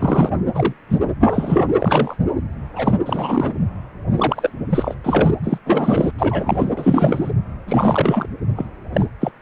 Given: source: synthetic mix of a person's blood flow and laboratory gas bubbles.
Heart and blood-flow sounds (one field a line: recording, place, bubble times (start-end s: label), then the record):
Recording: Doppler ultrasound of blood flow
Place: precordium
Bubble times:
0.00-0.30 s: bubbles
0.55-0.73 s: bubbles
0.88-0.98 s: bubbles
1.19-1.65 s: bubbles
1.79-2.17 s: bubbles
2.75-2.94 s: bubbles
3.05-3.53 s: bubbles
4.17-4.50 s: bubbles
4.70-4.95 s: bubbles
5.04-5.31 s: bubbles
5.43-5.58 s: bubbles
5.66-6.11 s: bubbles
6.18-6.72 s: bubbles
6.77-7.31 s: bubbles
7.67-8.26 s: bubbles
8.56-8.65 s: bubbles
8.93-9.06 s: bubbles
9.21-9.32 s: bubbles
From the record:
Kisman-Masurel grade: 243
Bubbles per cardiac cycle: several, 3 to 8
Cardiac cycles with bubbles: 100%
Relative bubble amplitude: loud (0.450 to 0.775)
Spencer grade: 3 (all of the cardiac periods contain showers or single bubble signals, but not dominating or overriding the cardiac motion signals)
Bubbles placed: anywhere in the cardiac cycle